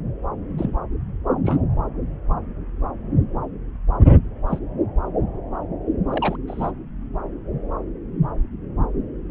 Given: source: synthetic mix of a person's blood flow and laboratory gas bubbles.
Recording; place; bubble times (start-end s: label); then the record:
Doppler ultrasound of blood flow; subclavian vein
0.57-0.75 s: bubbles
1.45-1.59 s: bubbles
4.47-4.58 s: bubbles
6.09-6.37 s: bubbles
6.47-6.71 s: bubbles
From the record:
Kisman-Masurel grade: 122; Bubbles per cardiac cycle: 1 to 2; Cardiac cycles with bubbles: 10 to 50%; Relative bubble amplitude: moderate (0.250 to 0.450); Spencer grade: 2 (many but less than half of the cardiac periods contain bubble signals, singularly or in groups); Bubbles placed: anywhere in the cardiac cycle